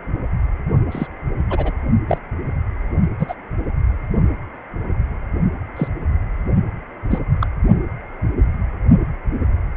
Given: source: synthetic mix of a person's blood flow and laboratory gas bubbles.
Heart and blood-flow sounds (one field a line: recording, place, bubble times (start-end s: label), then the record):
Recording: Doppler ultrasound of blood flow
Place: precordium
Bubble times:
0.91-1.07 s: bubbles
1.49-1.71 s: bubbles
2.08-2.18 s: bubbles
3.19-3.34 s: bubbles
5.76-5.88 s: bubbles
7.10-7.20 s: bubbles
7.41-7.47 s: bubbles
From the record:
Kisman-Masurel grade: 122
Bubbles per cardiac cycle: 1 to 2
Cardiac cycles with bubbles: 10 to 50%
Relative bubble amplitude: moderate (0.250 to 0.450)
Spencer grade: 2 (many but less than half of the cardiac periods contain bubble signals, singularly or in groups)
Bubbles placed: only in the low amplitude regions of the cardiac cycle